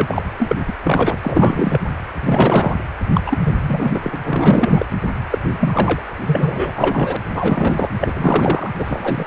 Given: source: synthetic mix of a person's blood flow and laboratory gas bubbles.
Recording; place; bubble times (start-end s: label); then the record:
Doppler ultrasound of blood flow; precordium
0.00-0.24 s: bubbles
0.36-0.60 s: bubbles
0.67-0.73 s: bubbles
0.83-1.17 s: bubbles
1.22-1.80 s: bubbles
2.21-2.75 s: bubbles
3.14-3.21 s: bubbles
3.25-3.39 s: bubbles
3.44-4.16 s: bubbles
4.23-4.85 s: bubbles
5.31-5.38 s: bubbles
5.44-5.50 s: bubbles
5.59-6.02 s: bubbles
6.26-7.17 s: bubbles
7.34-7.89 s: bubbles
8.00-8.70 s: bubbles
8.78-9.27 s: bubbles
From the record:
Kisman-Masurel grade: 343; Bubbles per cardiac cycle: rolling drumbeat, 9 or more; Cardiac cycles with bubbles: 100%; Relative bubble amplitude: loud (0.450 to 0.775); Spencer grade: 3 (all of the cardiac periods contain showers or single bubble signals, but not dominating or overriding the cardiac motion signals); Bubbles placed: anywhere in the cardiac cycle